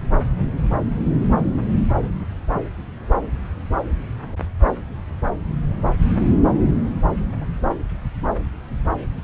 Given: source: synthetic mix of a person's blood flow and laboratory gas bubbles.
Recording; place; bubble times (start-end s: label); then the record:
Doppler ultrasound of blood flow; subclavian vein
no bubbles
From the record:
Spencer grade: 0 (complete lack of bubble signals)